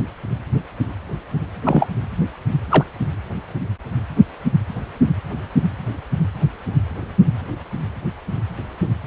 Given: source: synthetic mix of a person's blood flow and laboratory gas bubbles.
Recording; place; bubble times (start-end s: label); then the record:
Doppler ultrasound of blood flow; precordium
1.64-1.89 s: bubbles
2.71-2.84 s: bubbles
From the record:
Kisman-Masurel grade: 113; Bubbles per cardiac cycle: 1 to 2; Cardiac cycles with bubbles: 1 to 10%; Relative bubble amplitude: loud (0.450 to 0.775); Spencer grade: 1 (occasional bubble signal discernible with the cardiac motion signal, with majority of cardiac periods free of bubbles); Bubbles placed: anywhere in the cardiac cycle